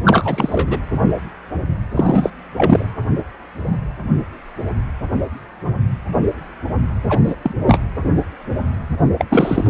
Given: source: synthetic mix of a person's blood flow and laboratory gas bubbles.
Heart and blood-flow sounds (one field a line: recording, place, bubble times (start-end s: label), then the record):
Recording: Doppler ultrasound of blood flow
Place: precordium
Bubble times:
0.04-0.78 s: bubbles
1.95-2.30 s: bubbles
2.57-2.85 s: bubbles
7.08-7.21 s: bubbles
7.23-7.36 s: bubbles
7.42-7.54 s: bubbles
7.67-7.80 s: bubbles
9.18-9.25 s: bubbles
9.29-9.69 s: bubbles
From the record:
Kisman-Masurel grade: 223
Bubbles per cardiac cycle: several, 3 to 8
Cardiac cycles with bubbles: 10 to 50%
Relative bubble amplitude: loud (0.450 to 0.775)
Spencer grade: 2 (many but less than half of the cardiac periods contain bubble signals, singularly or in groups)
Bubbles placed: anywhere in the cardiac cycle